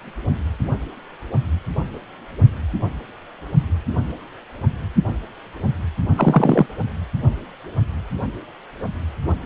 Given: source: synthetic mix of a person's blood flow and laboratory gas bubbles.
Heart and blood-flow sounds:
Doppler ultrasound of blood flow; precordium
6.16-6.66 s: bubbles
From the record:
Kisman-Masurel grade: 113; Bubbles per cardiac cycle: 1 to 2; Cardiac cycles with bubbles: 1 to 10%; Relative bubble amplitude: loud (0.450 to 0.775); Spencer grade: 1 (occasional bubble signal discernible with the cardiac motion signal, with majority of cardiac periods free of bubbles); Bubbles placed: only in the low amplitude regions of the cardiac cycle

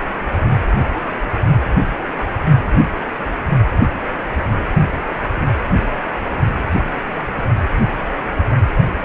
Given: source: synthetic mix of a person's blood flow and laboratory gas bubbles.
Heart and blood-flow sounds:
Doppler ultrasound of blood flow; precordium
no bubbles
From the record:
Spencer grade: 0 (complete lack of bubble signals)

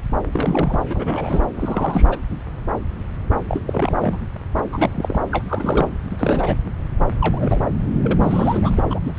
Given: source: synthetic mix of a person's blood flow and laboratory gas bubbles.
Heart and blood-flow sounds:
Doppler ultrasound of blood flow; subclavian vein
0.32-0.79 s: bubbles
0.90-1.47 s: bubbles
1.55-2.18 s: bubbles
3.48-3.62 s: bubbles
3.67-4.19 s: bubbles
4.72-5.18 s: bubbles
5.31-5.44 s: bubbles
5.47-5.88 s: bubbles
6.09-6.56 s: bubbles
7.21-7.60 s: bubbles
7.65-7.70 s: bubbles
8.02-8.85 s: bubbles
8.88-9.00 s: bubbles
9.05-9.12 s: bubbles
9.14-9.19 s: bubbles
From the record:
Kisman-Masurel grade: 332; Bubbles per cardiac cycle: rolling drumbeat, 9 or more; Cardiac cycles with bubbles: 50 to 99%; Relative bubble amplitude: moderate (0.250 to 0.450); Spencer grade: 3 (all of the cardiac periods contain showers or single bubble signals, but not dominating or overriding the cardiac motion signals); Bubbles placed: anywhere in the cardiac cycle

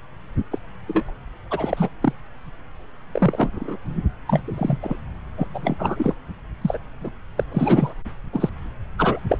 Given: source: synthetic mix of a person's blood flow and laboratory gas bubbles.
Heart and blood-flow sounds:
Doppler ultrasound of blood flow; subclavian vein
0.52-0.58 s: bubbles
0.88-1.03 s: bubbles
1.05-1.10 s: bubbles
1.50-1.89 s: bubbles
2.02-2.13 s: bubbles
3.12-3.77 s: bubbles
4.28-4.40 s: bubbles
4.46-4.79 s: bubbles
4.82-4.96 s: bubbles
5.37-5.47 s: bubbles
5.54-5.77 s: bubbles
5.79-6.14 s: bubbles
6.61-6.78 s: bubbles
7.00-7.10 s: bubbles
7.37-7.44 s: bubbles
7.52-7.94 s: bubbles
8.33-8.50 s: bubbles
8.98-9.19 s: bubbles
9.29-9.38 s: bubbles
From the record:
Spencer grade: 3 (all of the cardiac periods contain showers or single bubble signals, but not dominating or overriding the cardiac motion signals); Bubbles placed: anywhere in the cardiac cycle

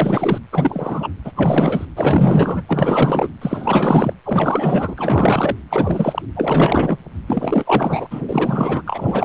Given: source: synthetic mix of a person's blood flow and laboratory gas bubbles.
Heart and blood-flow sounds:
Doppler ultrasound of blood flow; precordium
0.00-0.38 s: bubbles
0.52-1.11 s: bubbles
1.24-1.32 s: bubbles
1.35-1.85 s: bubbles
1.95-2.62 s: bubbles
2.68-3.29 s: bubbles
3.41-4.13 s: bubbles
4.24-5.56 s: bubbles
5.71-6.22 s: bubbles
6.36-6.97 s: bubbles
7.27-8.07 s: bubbles
8.11-8.22 s: bubbles
8.28-8.82 s: bubbles
8.85-9.25 s: bubbles
From the record:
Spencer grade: 4 (maximum detectable bubble signal sounding continuously throughout systole and diastole of every cardiac period, and overriding the amplitude of the normal cardiac signals); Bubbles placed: anywhere in the cardiac cycle

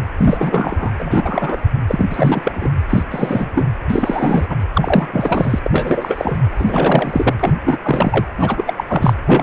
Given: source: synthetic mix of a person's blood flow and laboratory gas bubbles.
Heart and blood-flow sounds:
Doppler ultrasound of blood flow; precordium
0.18-0.92 s: bubbles
0.99-1.57 s: bubbles
1.88-2.71 s: bubbles
2.90-3.04 s: bubbles
3.10-3.50 s: bubbles
3.55-3.64 s: bubbles
3.90-4.56 s: bubbles
4.74-5.08 s: bubbles
5.12-5.59 s: bubbles
5.63-6.42 s: bubbles
6.58-7.34 s: bubbles
7.39-7.54 s: bubbles
7.66-7.78 s: bubbles
7.82-8.25 s: bubbles
8.38-8.73 s: bubbles
8.76-8.84 s: bubbles
8.87-9.13 s: bubbles
9.26-9.43 s: bubbles
From the record:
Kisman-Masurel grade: 343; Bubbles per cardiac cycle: rolling drumbeat, 9 or more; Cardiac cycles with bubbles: 100%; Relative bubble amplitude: loud (0.450 to 0.775); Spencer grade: 3 (all of the cardiac periods contain showers or single bubble signals, but not dominating or overriding the cardiac motion signals); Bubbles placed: anywhere in the cardiac cycle

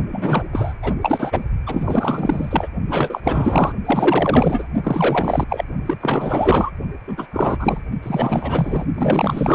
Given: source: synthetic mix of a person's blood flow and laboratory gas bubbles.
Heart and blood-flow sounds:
Doppler ultrasound of blood flow; precordium
0.12-0.43 s: bubbles
0.52-0.74 s: bubbles
0.82-0.93 s: bubbles
1.01-1.45 s: bubbles
1.66-2.67 s: bubbles
2.88-3.72 s: bubbles
3.85-4.68 s: bubbles
4.84-5.45 s: bubbles
5.49-5.64 s: bubbles
5.86-5.96 s: bubbles
6.01-6.71 s: bubbles
7.07-7.27 s: bubbles
7.33-7.82 s: bubbles
8.03-8.85 s: bubbles
8.94-9.54 s: bubbles
From the record:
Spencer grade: 4 (maximum detectable bubble signal sounding continuously throughout systole and diastole of every cardiac period, and overriding the amplitude of the normal cardiac signals); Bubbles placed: only in the low amplitude regions of the cardiac cycle

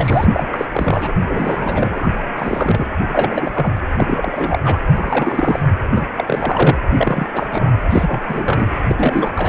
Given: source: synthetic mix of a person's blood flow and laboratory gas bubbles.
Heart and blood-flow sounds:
Doppler ultrasound of blood flow; precordium
0.00-0.49 s: bubbles
0.53-0.67 s: bubbles
0.74-1.14 s: bubbles
1.27-2.10 s: bubbles
2.37-2.85 s: bubbles
3.08-3.73 s: bubbles
3.97-4.59 s: bubbles
4.64-4.80 s: bubbles
4.95-5.69 s: bubbles
5.90-6.08 s: bubbles
6.16-6.79 s: bubbles
6.91-7.26 s: bubbles
7.33-7.72 s: bubbles
7.90-8.21 s: bubbles
8.28-8.80 s: bubbles
8.88-9.33 s: bubbles
9.36-9.48 s: bubbles
From the record:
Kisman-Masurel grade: 343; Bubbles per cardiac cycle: rolling drumbeat, 9 or more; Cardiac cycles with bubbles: 100%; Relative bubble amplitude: loud (0.450 to 0.775); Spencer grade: 3 (all of the cardiac periods contain showers or single bubble signals, but not dominating or overriding the cardiac motion signals); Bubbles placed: anywhere in the cardiac cycle

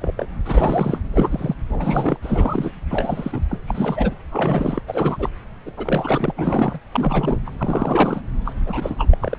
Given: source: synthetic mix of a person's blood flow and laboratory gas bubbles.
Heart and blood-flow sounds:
Doppler ultrasound of blood flow; subclavian vein
0.00-0.14 s: bubbles
0.17-0.27 s: bubbles
0.45-0.98 s: bubbles
1.13-1.54 s: bubbles
1.67-2.17 s: bubbles
2.22-2.71 s: bubbles
2.90-3.40 s: bubbles
3.49-3.59 s: bubbles
3.66-4.13 s: bubbles
4.32-4.81 s: bubbles
4.88-5.17 s: bubbles
5.19-5.29 s: bubbles
5.66-5.71 s: bubbles
5.77-6.32 s: bubbles
6.37-6.79 s: bubbles
6.94-7.39 s: bubbles
7.46-7.50 s: bubbles
7.58-8.21 s: bubbles
8.45-8.54 s: bubbles
8.66-9.38 s: bubbles
From the record:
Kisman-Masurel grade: 342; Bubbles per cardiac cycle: rolling drumbeat, 9 or more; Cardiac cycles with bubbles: 100%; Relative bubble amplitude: moderate (0.250 to 0.450); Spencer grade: 3 (all of the cardiac periods contain showers or single bubble signals, but not dominating or overriding the cardiac motion signals); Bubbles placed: anywhere in the cardiac cycle

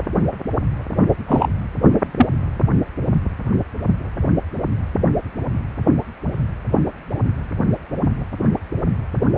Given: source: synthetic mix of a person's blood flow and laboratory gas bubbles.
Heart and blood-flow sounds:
Doppler ultrasound of blood flow; precordium
1.27-1.48 s: bubbles
2.18-2.25 s: bubbles
From the record:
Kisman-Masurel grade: 123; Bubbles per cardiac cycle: 1 to 2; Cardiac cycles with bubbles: 10 to 50%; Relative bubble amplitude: loud (0.450 to 0.775); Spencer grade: 2 (many but less than half of the cardiac periods contain bubble signals, singularly or in groups); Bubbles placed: anywhere in the cardiac cycle

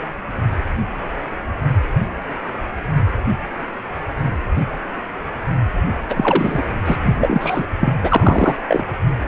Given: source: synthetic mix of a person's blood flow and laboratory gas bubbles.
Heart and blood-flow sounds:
Doppler ultrasound of blood flow; precordium
6.09-6.63 s: bubbles
6.86-6.96 s: bubbles
7.05-7.14 s: bubbles
7.16-7.66 s: bubbles
7.81-7.93 s: bubbles
8.02-8.56 s: bubbles
8.68-8.85 s: bubbles
From the record:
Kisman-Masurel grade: 223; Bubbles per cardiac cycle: several, 3 to 8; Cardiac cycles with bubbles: 10 to 50%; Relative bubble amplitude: loud (0.450 to 0.775); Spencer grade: 2 (many but less than half of the cardiac periods contain bubble signals, singularly or in groups); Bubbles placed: anywhere in the cardiac cycle

